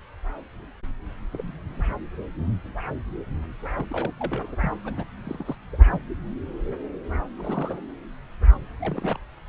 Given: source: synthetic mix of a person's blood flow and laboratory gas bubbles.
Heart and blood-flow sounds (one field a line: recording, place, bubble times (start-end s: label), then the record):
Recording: Doppler ultrasound of blood flow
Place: subclavian vein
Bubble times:
1.32-1.94 s: bubbles
3.75-3.85 s: bubbles
3.90-4.11 s: bubbles
4.18-4.56 s: bubbles
4.62-4.71 s: bubbles
4.85-5.04 s: bubbles
5.24-5.56 s: bubbles
5.71-6.00 s: bubbles
7.37-7.83 s: bubbles
8.80-9.18 s: bubbles
From the record:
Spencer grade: 2 (many but less than half of the cardiac periods contain bubble signals, singularly or in groups)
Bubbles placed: anywhere in the cardiac cycle